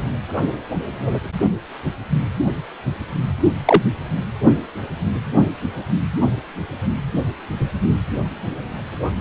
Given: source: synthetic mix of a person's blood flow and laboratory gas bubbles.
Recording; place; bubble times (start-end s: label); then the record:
Doppler ultrasound of blood flow; precordium
3.65-3.83 s: bubbles
From the record:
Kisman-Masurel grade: 113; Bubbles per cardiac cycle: 1 to 2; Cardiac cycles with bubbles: 1 to 10%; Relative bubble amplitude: loud (0.450 to 0.775); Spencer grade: 1 (occasional bubble signal discernible with the cardiac motion signal, with majority of cardiac periods free of bubbles); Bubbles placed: only in the low amplitude regions of the cardiac cycle